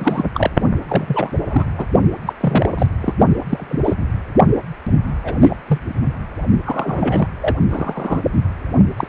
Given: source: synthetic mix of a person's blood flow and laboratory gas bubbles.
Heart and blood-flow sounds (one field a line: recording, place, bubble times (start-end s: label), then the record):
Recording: Doppler ultrasound of blood flow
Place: precordium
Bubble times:
0.00-0.25 s: bubbles
0.34-0.50 s: bubbles
0.88-1.66 s: bubbles
1.77-1.86 s: bubbles
2.26-2.33 s: bubbles
2.40-2.87 s: bubbles
3.00-3.14 s: bubbles
3.50-3.79 s: bubbles
3.84-3.94 s: bubbles
5.24-5.36 s: bubbles
5.41-5.57 s: bubbles
5.67-5.79 s: bubbles
6.65-7.28 s: bubbles
7.41-7.55 s: bubbles
7.69-8.20 s: bubbles
8.96-9.07 s: bubbles
From the record:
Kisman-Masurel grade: 243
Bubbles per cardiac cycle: several, 3 to 8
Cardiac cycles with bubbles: 100%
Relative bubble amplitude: loud (0.450 to 0.775)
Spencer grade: 3 (all of the cardiac periods contain showers or single bubble signals, but not dominating or overriding the cardiac motion signals)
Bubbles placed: only in the low amplitude regions of the cardiac cycle